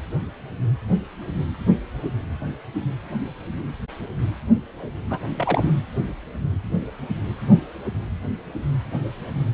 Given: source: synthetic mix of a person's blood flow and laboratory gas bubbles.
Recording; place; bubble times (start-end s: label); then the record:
Doppler ultrasound of blood flow; precordium
5.10-5.20 s: bubbles
5.36-5.72 s: bubbles
From the record:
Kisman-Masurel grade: 222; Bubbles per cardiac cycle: several, 3 to 8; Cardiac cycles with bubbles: 10 to 50%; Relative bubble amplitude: moderate (0.250 to 0.450); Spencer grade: 2 (many but less than half of the cardiac periods contain bubble signals, singularly or in groups); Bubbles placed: anywhere in the cardiac cycle